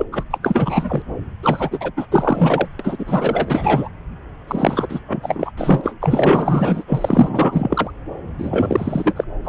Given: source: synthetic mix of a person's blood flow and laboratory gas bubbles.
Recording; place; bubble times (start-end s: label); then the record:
Doppler ultrasound of blood flow; subclavian vein
0.00-0.06 s: bubbles
0.12-0.24 s: bubbles
0.30-0.38 s: bubbles
0.42-1.02 s: bubbles
1.43-1.91 s: bubbles
1.96-2.06 s: bubbles
2.11-2.67 s: bubbles
2.79-3.88 s: bubbles
4.47-5.00 s: bubbles
5.07-5.51 s: bubbles
5.56-5.93 s: bubbles
6.00-6.83 s: bubbles
6.87-7.91 s: bubbles
8.38-9.14 s: bubbles
9.16-9.24 s: bubbles
9.44-9.49 s: bubbles
From the record:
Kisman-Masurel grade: 444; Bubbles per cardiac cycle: continuous sound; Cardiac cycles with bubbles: 100%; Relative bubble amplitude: maximal (0.775 to 0.999); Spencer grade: 4 (maximum detectable bubble signal sounding continuously throughout systole and diastole of every cardiac period, and overriding the amplitude of the normal cardiac signals); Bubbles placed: anywhere in the cardiac cycle